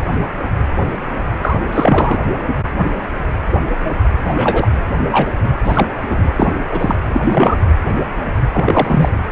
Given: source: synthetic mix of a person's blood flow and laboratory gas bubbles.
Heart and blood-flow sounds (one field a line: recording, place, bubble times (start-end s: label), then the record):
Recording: Doppler ultrasound of blood flow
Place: precordium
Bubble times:
1.41-1.57 s: bubbles
1.72-2.19 s: bubbles
4.25-4.71 s: bubbles
5.11-5.28 s: bubbles
5.44-5.50 s: bubbles
5.64-5.87 s: bubbles
6.10-6.32 s: bubbles
6.37-6.53 s: bubbles
6.71-6.96 s: bubbles
7.13-7.21 s: bubbles
7.25-7.57 s: bubbles
8.53-9.09 s: bubbles
From the record:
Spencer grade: 3 (all of the cardiac periods contain showers or single bubble signals, but not dominating or overriding the cardiac motion signals)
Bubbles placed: anywhere in the cardiac cycle